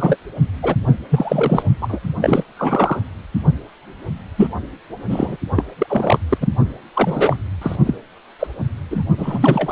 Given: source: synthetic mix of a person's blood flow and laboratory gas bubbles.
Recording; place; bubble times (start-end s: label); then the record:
Doppler ultrasound of blood flow; precordium
0.00-0.17 s: bubbles
0.62-0.75 s: bubbles
1.10-1.62 s: bubbles
1.81-2.00 s: bubbles
2.21-2.44 s: bubbles
2.56-3.02 s: bubbles
4.37-4.48 s: bubbles
5.08-5.37 s: bubbles
5.56-5.64 s: bubbles
5.78-6.18 s: bubbles
6.29-6.38 s: bubbles
6.41-6.48 s: bubbles
6.94-7.37 s: bubbles
7.61-7.76 s: bubbles
7.86-7.95 s: bubbles
8.39-8.47 s: bubbles
8.90-9.03 s: bubbles
9.17-9.72 s: bubbles
From the record:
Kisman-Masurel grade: 243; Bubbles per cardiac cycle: several, 3 to 8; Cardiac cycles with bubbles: 100%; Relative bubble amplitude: loud (0.450 to 0.775); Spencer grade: 3 (all of the cardiac periods contain showers or single bubble signals, but not dominating or overriding the cardiac motion signals); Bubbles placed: only in the low amplitude regions of the cardiac cycle